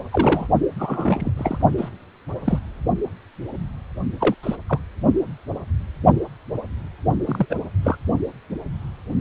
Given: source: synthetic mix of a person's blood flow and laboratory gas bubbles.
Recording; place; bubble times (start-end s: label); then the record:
Doppler ultrasound of blood flow; precordium
0.10-0.48 s: bubbles
0.76-1.30 s: bubbles
1.37-1.58 s: bubbles
1.77-1.89 s: bubbles
2.45-2.58 s: bubbles
4.20-4.34 s: bubbles
4.43-4.56 s: bubbles
4.68-4.79 s: bubbles
7.26-7.46 s: bubbles
7.50-7.56 s: bubbles
7.83-7.97 s: bubbles
From the record:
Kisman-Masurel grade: 222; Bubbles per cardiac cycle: several, 3 to 8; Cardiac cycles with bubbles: 10 to 50%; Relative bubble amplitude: moderate (0.250 to 0.450); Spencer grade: 2 (many but less than half of the cardiac periods contain bubble signals, singularly or in groups); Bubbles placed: only in the low amplitude regions of the cardiac cycle